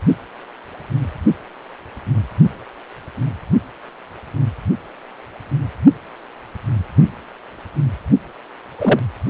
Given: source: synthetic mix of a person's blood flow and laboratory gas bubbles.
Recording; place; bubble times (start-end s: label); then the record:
Doppler ultrasound of blood flow; precordium
8.78-8.99 s: bubbles
From the record:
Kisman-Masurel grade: 113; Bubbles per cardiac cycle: 1 to 2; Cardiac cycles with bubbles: 1 to 10%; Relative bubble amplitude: loud (0.450 to 0.775); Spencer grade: 1 (occasional bubble signal discernible with the cardiac motion signal, with majority of cardiac periods free of bubbles); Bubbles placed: only in the low amplitude regions of the cardiac cycle